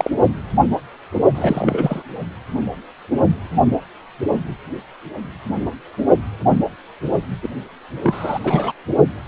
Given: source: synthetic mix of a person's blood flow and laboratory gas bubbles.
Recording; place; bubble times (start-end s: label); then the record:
Doppler ultrasound of blood flow; precordium
0.00-0.10 s: bubbles
1.35-2.02 s: bubbles
7.42-7.49 s: bubbles
8.03-8.40 s: bubbles
8.44-8.72 s: bubbles
9.24-9.28 s: bubbles
From the record:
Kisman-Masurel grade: 223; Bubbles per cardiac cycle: several, 3 to 8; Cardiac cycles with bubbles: 10 to 50%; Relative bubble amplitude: loud (0.450 to 0.775); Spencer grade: 2 (many but less than half of the cardiac periods contain bubble signals, singularly or in groups); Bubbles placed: only in the low amplitude regions of the cardiac cycle